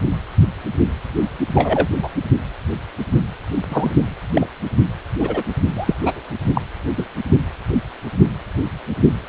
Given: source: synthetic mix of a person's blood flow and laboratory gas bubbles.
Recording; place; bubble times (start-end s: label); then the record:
Doppler ultrasound of blood flow; precordium
1.55-1.88 s: bubbles
2.01-2.08 s: bubbles
3.68-3.91 s: bubbles
4.33-4.47 s: bubbles
5.20-5.43 s: bubbles
5.76-5.95 s: bubbles
6.00-6.21 s: bubbles
6.54-6.61 s: bubbles
6.97-7.05 s: bubbles
From the record:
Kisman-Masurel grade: 122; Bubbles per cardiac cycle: 1 to 2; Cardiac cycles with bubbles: 10 to 50%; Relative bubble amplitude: moderate (0.250 to 0.450); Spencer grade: 2 (many but less than half of the cardiac periods contain bubble signals, singularly or in groups); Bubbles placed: only in the low amplitude regions of the cardiac cycle